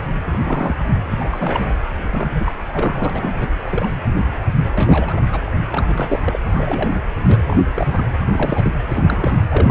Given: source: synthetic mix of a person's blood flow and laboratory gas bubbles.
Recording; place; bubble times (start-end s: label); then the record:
Doppler ultrasound of blood flow; precordium
0.31-0.83 s: bubbles
1.09-1.66 s: bubbles
2.06-2.52 s: bubbles
2.67-3.10 s: bubbles
3.13-3.48 s: bubbles
3.62-3.93 s: bubbles
4.75-5.20 s: bubbles
5.31-5.41 s: bubbles
5.68-6.21 s: bubbles
6.24-6.39 s: bubbles
6.54-7.01 s: bubbles
7.27-7.58 s: bubbles
7.74-8.04 s: bubbles
8.26-8.75 s: bubbles
8.88-9.31 s: bubbles
9.48-9.71 s: bubbles
From the record:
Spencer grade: 3 (all of the cardiac periods contain showers or single bubble signals, but not dominating or overriding the cardiac motion signals); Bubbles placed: anywhere in the cardiac cycle